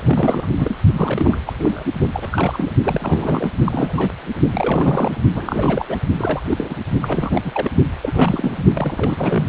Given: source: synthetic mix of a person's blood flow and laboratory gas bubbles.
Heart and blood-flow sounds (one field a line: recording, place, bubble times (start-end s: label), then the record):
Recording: Doppler ultrasound of blood flow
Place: precordium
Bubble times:
0.00-0.48 s: bubbles
0.59-0.75 s: bubbles
0.93-1.38 s: bubbles
1.46-1.53 s: bubbles
1.59-1.85 s: bubbles
2.03-2.09 s: bubbles
2.14-2.72 s: bubbles
2.83-3.51 s: bubbles
3.65-4.13 s: bubbles
4.51-5.24 s: bubbles
5.31-5.85 s: bubbles
5.88-5.96 s: bubbles
6.17-6.41 s: bubbles
6.45-6.75 s: bubbles
7.02-7.71 s: bubbles
8.02-8.64 s: bubbles
8.73-9.47 s: bubbles
From the record:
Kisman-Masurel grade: 332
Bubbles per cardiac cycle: rolling drumbeat, 9 or more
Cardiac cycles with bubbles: 50 to 99%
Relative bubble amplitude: moderate (0.250 to 0.450)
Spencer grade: 3 (all of the cardiac periods contain showers or single bubble signals, but not dominating or overriding the cardiac motion signals)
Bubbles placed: only in the low amplitude regions of the cardiac cycle